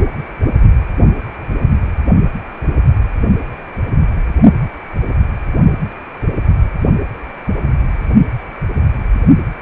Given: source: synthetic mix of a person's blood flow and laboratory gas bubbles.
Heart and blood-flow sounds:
Doppler ultrasound of blood flow; precordium
no bubbles
From the record:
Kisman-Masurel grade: 000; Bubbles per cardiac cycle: 0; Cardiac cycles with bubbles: 0%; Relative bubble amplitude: no bubbles discernible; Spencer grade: 0 (complete lack of bubble signals)

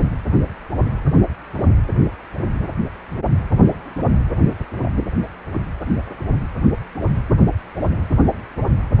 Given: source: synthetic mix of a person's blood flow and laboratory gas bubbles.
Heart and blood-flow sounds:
Doppler ultrasound of blood flow; precordium
4.46-4.56 s: bubbles
4.82-4.92 s: bubbles
From the record:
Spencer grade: 1 (occasional bubble signal discernible with the cardiac motion signal, with majority of cardiac periods free of bubbles); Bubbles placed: anywhere in the cardiac cycle

